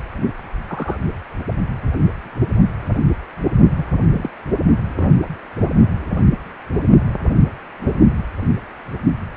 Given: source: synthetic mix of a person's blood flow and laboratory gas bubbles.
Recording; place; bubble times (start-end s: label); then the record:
Doppler ultrasound of blood flow; precordium
0.68-0.97 s: bubbles
3.77-3.86 s: bubbles
4.12-4.30 s: bubbles
4.95-5.07 s: bubbles
From the record:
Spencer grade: 2 (many but less than half of the cardiac periods contain bubble signals, singularly or in groups); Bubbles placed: only in the low amplitude regions of the cardiac cycle